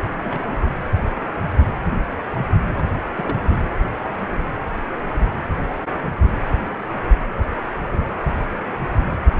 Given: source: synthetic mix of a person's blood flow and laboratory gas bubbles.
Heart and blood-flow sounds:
Doppler ultrasound of blood flow; precordium
0.23-0.57 s: bubbles
2.75-2.85 s: bubbles
2.90-2.94 s: bubbles
3.15-3.43 s: bubbles
3.50-3.56 s: bubbles
From the record:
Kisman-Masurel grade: 221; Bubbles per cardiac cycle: several, 3 to 8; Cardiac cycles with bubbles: 10 to 50%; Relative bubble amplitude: barely perceptible (0.100 to 0.250); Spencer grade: 2 (many but less than half of the cardiac periods contain bubble signals, singularly or in groups); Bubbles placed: anywhere in the cardiac cycle

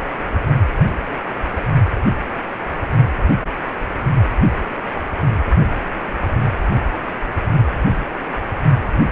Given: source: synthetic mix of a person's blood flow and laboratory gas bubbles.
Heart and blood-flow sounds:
Doppler ultrasound of blood flow; precordium
1.47-1.63 s: bubbles
From the record:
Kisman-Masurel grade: 111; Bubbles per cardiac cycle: 1 to 2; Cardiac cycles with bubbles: 1 to 10%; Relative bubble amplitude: barely perceptible (0.100 to 0.250); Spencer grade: 1 (occasional bubble signal discernible with the cardiac motion signal, with majority of cardiac periods free of bubbles); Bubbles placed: only in the low amplitude regions of the cardiac cycle

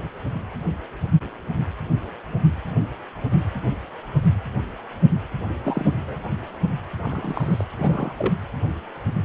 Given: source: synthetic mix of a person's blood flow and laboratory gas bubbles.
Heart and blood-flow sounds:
Doppler ultrasound of blood flow; precordium
5.64-6.16 s: bubbles
7.04-7.65 s: bubbles
7.77-8.13 s: bubbles
8.18-8.32 s: bubbles
From the record:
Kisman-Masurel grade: 221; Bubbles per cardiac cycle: several, 3 to 8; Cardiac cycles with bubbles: 10 to 50%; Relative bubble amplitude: barely perceptible (0.100 to 0.250); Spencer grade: 2 (many but less than half of the cardiac periods contain bubble signals, singularly or in groups); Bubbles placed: anywhere in the cardiac cycle

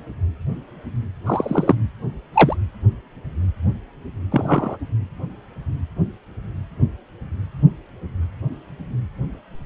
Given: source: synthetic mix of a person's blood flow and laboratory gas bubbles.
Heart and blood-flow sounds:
Doppler ultrasound of blood flow; precordium
1.26-1.75 s: bubbles
2.33-2.56 s: bubbles
4.31-4.76 s: bubbles
From the record:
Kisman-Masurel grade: 123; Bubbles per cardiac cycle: 1 to 2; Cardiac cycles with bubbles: 10 to 50%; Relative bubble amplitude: loud (0.450 to 0.775); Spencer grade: 2 (many but less than half of the cardiac periods contain bubble signals, singularly or in groups); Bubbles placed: anywhere in the cardiac cycle

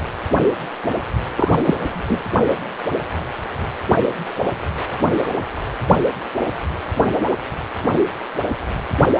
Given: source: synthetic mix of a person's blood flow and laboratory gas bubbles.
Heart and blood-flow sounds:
Doppler ultrasound of blood flow; precordium
1.36-1.81 s: bubbles
1.88-2.21 s: bubbles
From the record:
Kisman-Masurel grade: 213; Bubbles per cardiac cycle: several, 3 to 8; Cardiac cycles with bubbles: 1 to 10%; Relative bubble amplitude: loud (0.450 to 0.775); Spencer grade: 1 (occasional bubble signal discernible with the cardiac motion signal, with majority of cardiac periods free of bubbles); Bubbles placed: anywhere in the cardiac cycle

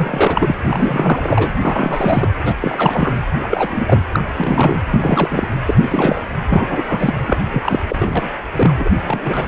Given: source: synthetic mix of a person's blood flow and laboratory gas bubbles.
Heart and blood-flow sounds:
Doppler ultrasound of blood flow; precordium
0.00-0.55 s: bubbles
0.64-1.49 s: bubbles
1.60-2.28 s: bubbles
2.44-2.54 s: bubbles
2.60-3.13 s: bubbles
3.38-4.04 s: bubbles
4.12-4.22 s: bubbles
4.34-4.82 s: bubbles
4.91-5.57 s: bubbles
5.66-6.22 s: bubbles
6.49-6.83 s: bubbles
6.88-7.15 s: bubbles
7.27-7.37 s: bubbles
7.51-7.80 s: bubbles
7.89-8.29 s: bubbles
8.55-8.72 s: bubbles
8.79-8.90 s: bubbles
9.04-9.48 s: bubbles
From the record:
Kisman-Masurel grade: 343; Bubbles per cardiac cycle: rolling drumbeat, 9 or more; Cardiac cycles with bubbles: 100%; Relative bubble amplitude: loud (0.450 to 0.775); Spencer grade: 3 (all of the cardiac periods contain showers or single bubble signals, but not dominating or overriding the cardiac motion signals); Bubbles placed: anywhere in the cardiac cycle

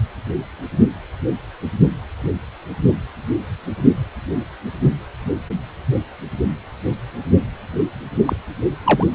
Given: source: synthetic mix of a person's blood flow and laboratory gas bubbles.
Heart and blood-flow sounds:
Doppler ultrasound of blood flow; precordium
8.27-8.36 s: bubbles
8.84-9.05 s: bubbles
From the record:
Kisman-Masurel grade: 113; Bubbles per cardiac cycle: 1 to 2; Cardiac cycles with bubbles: 1 to 10%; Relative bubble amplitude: loud (0.450 to 0.775); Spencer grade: 1 (occasional bubble signal discernible with the cardiac motion signal, with majority of cardiac periods free of bubbles); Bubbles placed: only in the low amplitude regions of the cardiac cycle

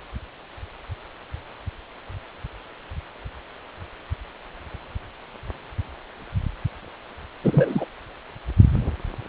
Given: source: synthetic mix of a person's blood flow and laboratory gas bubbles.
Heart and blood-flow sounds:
Doppler ultrasound of blood flow; precordium
7.44-7.85 s: bubbles
From the record:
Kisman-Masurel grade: 113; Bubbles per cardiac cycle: 1 to 2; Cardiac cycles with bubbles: 1 to 10%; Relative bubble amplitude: loud (0.450 to 0.775); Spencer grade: 1 (occasional bubble signal discernible with the cardiac motion signal, with majority of cardiac periods free of bubbles); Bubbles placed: anywhere in the cardiac cycle

